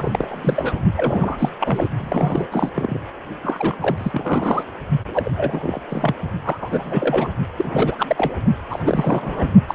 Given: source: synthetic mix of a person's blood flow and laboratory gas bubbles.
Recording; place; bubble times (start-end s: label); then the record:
Doppler ultrasound of blood flow; precordium
0.00-0.80 s: bubbles
0.97-1.36 s: bubbles
1.39-1.49 s: bubbles
1.60-1.88 s: bubbles
2.00-2.49 s: bubbles
2.51-2.69 s: bubbles
2.75-2.99 s: bubbles
3.43-3.77 s: bubbles
3.81-4.63 s: bubbles
5.13-5.31 s: bubbles
5.36-5.80 s: bubbles
5.88-6.14 s: bubbles
6.44-6.58 s: bubbles
6.61-7.28 s: bubbles
7.57-7.95 s: bubbles
7.98-8.33 s: bubbles
8.70-9.48 s: bubbles
9.68-9.75 s: bubbles
From the record:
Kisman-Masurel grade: 342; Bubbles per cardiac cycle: rolling drumbeat, 9 or more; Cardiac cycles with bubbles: 100%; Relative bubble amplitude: moderate (0.250 to 0.450); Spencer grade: 3 (all of the cardiac periods contain showers or single bubble signals, but not dominating or overriding the cardiac motion signals); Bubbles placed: only in the low amplitude regions of the cardiac cycle